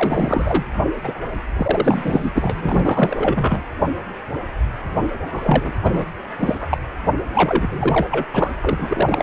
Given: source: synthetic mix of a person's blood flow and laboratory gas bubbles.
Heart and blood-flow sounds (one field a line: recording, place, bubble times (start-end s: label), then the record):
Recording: Doppler ultrasound of blood flow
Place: precordium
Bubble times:
0.00-0.66 s: bubbles
1.03-1.21 s: bubbles
1.55-2.31 s: bubbles
2.35-3.62 s: bubbles
5.32-5.80 s: bubbles
5.83-6.05 s: bubbles
6.40-6.78 s: bubbles
7.34-8.06 s: bubbles
8.11-8.26 s: bubbles
8.33-8.51 s: bubbles
8.61-8.87 s: bubbles
8.89-9.23 s: bubbles
From the record:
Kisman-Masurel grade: 333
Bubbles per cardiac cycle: rolling drumbeat, 9 or more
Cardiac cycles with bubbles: 50 to 99%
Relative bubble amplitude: loud (0.450 to 0.775)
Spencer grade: 3 (all of the cardiac periods contain showers or single bubble signals, but not dominating or overriding the cardiac motion signals)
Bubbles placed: anywhere in the cardiac cycle